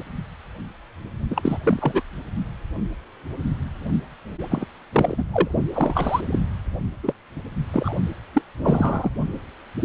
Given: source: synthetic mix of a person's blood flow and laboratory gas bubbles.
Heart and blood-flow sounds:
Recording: Doppler ultrasound of blood flow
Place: precordium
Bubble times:
0.00-0.02 s: bubbles
1.30-1.58 s: bubbles
1.64-2.02 s: bubbles
4.51-4.65 s: bubbles
4.93-5.23 s: bubbles
5.33-5.48 s: bubbles
5.74-6.21 s: bubbles
6.32-6.39 s: bubbles
7.03-7.14 s: bubbles
7.73-7.93 s: bubbles
8.33-8.42 s: bubbles
8.59-9.10 s: bubbles
From the record:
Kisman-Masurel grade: 232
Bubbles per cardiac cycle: several, 3 to 8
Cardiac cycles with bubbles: 50 to 99%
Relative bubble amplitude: moderate (0.250 to 0.450)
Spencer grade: 3 (all of the cardiac periods contain showers or single bubble signals, but not dominating or overriding the cardiac motion signals)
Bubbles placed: only in the low amplitude regions of the cardiac cycle

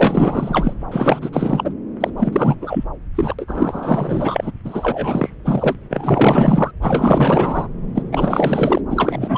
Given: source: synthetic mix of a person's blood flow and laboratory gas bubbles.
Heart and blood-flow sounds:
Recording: Doppler ultrasound of blood flow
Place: subclavian vein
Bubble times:
0.00-0.74 s: bubbles
0.91-1.30 s: bubbles
1.32-1.74 s: bubbles
2.00-2.10 s: bubbles
2.17-2.55 s: bubbles
2.61-2.85 s: bubbles
3.15-3.35 s: bubbles
3.38-4.52 s: bubbles
4.65-5.76 s: bubbles
5.90-6.71 s: bubbles
6.81-7.67 s: bubbles
7.94-8.03 s: bubbles
8.12-8.81 s: bubbles
8.89-9.38 s: bubbles
From the record:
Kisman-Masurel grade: 444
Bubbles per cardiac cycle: continuous sound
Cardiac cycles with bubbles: 100%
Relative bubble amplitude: maximal (0.775 to 0.999)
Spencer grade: 4 (maximum detectable bubble signal sounding continuously throughout systole and diastole of every cardiac period, and overriding the amplitude of the normal cardiac signals)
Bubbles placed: anywhere in the cardiac cycle

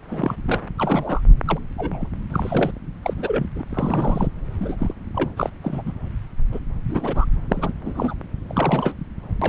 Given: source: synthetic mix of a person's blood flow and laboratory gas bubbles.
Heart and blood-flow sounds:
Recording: Doppler ultrasound of blood flow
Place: subclavian vein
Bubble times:
0.09-0.35 s: bubbles
0.45-0.60 s: bubbles
0.78-1.21 s: bubbles
1.46-1.58 s: bubbles
1.78-2.09 s: bubbles
2.31-2.72 s: bubbles
3.03-3.14 s: bubbles
3.17-3.46 s: bubbles
3.55-3.63 s: bubbles
3.71-4.28 s: bubbles
4.60-4.94 s: bubbles
5.15-5.30 s: bubbles
5.37-5.50 s: bubbles
5.63-5.82 s: bubbles
5.86-5.93 s: bubbles
6.52-6.59 s: bubbles
6.88-7.25 s: bubbles
7.49-7.73 s: bubbles
7.82-8.13 s: bubbles
8.47-8.94 s: bubbles
9.42-9.49 s: bubbles
From the record:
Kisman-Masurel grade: 242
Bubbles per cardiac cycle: several, 3 to 8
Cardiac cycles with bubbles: 100%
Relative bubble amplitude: moderate (0.250 to 0.450)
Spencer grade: 3 (all of the cardiac periods contain showers or single bubble signals, but not dominating or overriding the cardiac motion signals)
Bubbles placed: anywhere in the cardiac cycle

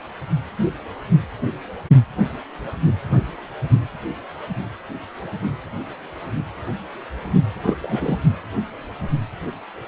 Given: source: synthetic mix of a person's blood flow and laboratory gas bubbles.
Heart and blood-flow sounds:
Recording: Doppler ultrasound of blood flow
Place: precordium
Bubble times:
7.62-7.75 s: bubbles
7.83-8.20 s: bubbles
From the record:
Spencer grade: 1 (occasional bubble signal discernible with the cardiac motion signal, with majority of cardiac periods free of bubbles)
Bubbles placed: only in the low amplitude regions of the cardiac cycle

